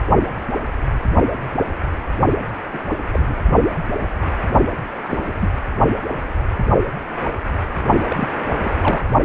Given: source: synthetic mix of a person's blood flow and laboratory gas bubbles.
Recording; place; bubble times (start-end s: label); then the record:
Doppler ultrasound of blood flow; precordium
2.73-2.81 s: bubbles
3.14-3.37 s: bubbles
5.03-5.20 s: bubbles
5.26-5.33 s: bubbles
5.40-5.48 s: bubbles
8.08-8.29 s: bubbles
8.63-8.73 s: bubbles
8.82-9.03 s: bubbles
From the record:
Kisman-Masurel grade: 232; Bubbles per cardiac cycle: several, 3 to 8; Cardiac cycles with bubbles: 50 to 99%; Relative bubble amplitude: moderate (0.250 to 0.450); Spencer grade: 3 (all of the cardiac periods contain showers or single bubble signals, but not dominating or overriding the cardiac motion signals); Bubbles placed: only in the low amplitude regions of the cardiac cycle